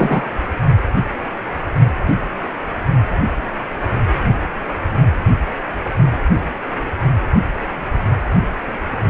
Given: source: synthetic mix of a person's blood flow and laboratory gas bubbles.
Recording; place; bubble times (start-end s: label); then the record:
Doppler ultrasound of blood flow; precordium
0.00-0.25 s: bubbles
From the record:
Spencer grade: 1 (occasional bubble signal discernible with the cardiac motion signal, with majority of cardiac periods free of bubbles); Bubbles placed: only in the low amplitude regions of the cardiac cycle